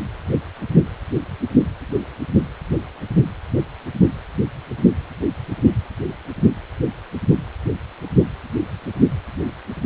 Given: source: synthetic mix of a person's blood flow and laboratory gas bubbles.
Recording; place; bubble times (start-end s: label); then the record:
Doppler ultrasound of blood flow; precordium
no bubbles
From the record:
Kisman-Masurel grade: 000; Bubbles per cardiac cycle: 0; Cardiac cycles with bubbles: 0%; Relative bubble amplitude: no bubbles discernible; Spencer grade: 0 (complete lack of bubble signals)